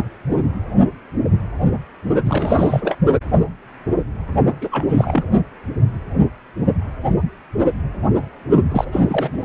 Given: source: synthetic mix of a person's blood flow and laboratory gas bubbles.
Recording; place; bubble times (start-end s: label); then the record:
Doppler ultrasound of blood flow; precordium
2.25-2.96 s: bubbles
4.61-5.26 s: bubbles
8.71-8.85 s: bubbles
8.92-9.00 s: bubbles
9.04-9.45 s: bubbles
From the record:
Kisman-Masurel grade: 222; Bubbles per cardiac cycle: several, 3 to 8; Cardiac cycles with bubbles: 10 to 50%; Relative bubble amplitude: moderate (0.250 to 0.450); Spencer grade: 2 (many but less than half of the cardiac periods contain bubble signals, singularly or in groups); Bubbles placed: only in the low amplitude regions of the cardiac cycle